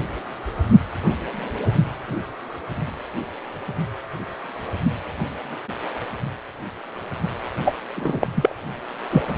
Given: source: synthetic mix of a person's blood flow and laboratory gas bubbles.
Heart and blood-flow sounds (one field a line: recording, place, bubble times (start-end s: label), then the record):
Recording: Doppler ultrasound of blood flow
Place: precordium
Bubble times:
7.64-7.75 s: bubbles
7.96-8.27 s: bubbles
8.36-8.53 s: bubbles
9.10-9.23 s: bubbles
From the record:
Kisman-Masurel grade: 223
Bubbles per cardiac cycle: several, 3 to 8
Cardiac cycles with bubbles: 10 to 50%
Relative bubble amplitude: loud (0.450 to 0.775)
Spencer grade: 2 (many but less than half of the cardiac periods contain bubble signals, singularly or in groups)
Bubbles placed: only in the low amplitude regions of the cardiac cycle